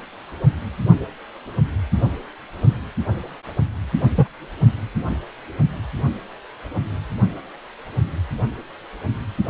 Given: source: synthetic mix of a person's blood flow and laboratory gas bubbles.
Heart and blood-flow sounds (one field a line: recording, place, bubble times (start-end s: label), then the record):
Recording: Doppler ultrasound of blood flow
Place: precordium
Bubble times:
4.17-4.28 s: bubbles
From the record:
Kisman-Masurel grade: 123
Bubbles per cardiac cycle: 1 to 2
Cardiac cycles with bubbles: 10 to 50%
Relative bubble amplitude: loud (0.450 to 0.775)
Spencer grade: 2 (many but less than half of the cardiac periods contain bubble signals, singularly or in groups)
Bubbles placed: anywhere in the cardiac cycle